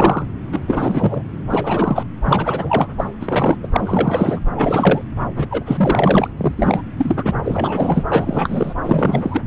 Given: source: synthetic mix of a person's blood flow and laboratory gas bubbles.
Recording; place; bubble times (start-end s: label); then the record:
Doppler ultrasound of blood flow; subclavian vein
0.00-0.26 s: bubbles
0.52-0.60 s: bubbles
0.67-1.22 s: bubbles
1.50-2.04 s: bubbles
2.25-2.89 s: bubbles
2.98-3.08 s: bubbles
3.21-3.56 s: bubbles
3.62-3.67 s: bubbles
3.72-4.40 s: bubbles
4.57-5.01 s: bubbles
5.36-5.47 s: bubbles
5.50-6.28 s: bubbles
6.37-6.53 s: bubbles
6.56-6.82 s: bubbles
6.96-7.31 s: bubbles
7.45-8.03 s: bubbles
8.12-8.74 s: bubbles
8.83-9.41 s: bubbles
From the record:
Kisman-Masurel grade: 343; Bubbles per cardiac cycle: rolling drumbeat, 9 or more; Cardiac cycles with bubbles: 100%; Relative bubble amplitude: loud (0.450 to 0.775); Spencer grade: 3 (all of the cardiac periods contain showers or single bubble signals, but not dominating or overriding the cardiac motion signals); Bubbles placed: anywhere in the cardiac cycle